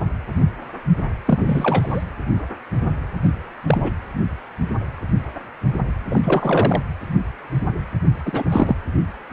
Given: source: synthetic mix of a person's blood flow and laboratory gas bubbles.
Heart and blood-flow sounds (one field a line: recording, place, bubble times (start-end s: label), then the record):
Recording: Doppler ultrasound of blood flow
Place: precordium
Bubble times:
1.26-2.04 s: bubbles
3.23-3.32 s: bubbles
3.68-3.91 s: bubbles
6.10-6.21 s: bubbles
6.23-6.82 s: bubbles
8.25-8.76 s: bubbles
From the record:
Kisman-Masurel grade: 223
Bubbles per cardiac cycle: several, 3 to 8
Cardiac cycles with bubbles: 10 to 50%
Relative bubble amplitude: loud (0.450 to 0.775)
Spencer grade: 2 (many but less than half of the cardiac periods contain bubble signals, singularly or in groups)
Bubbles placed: anywhere in the cardiac cycle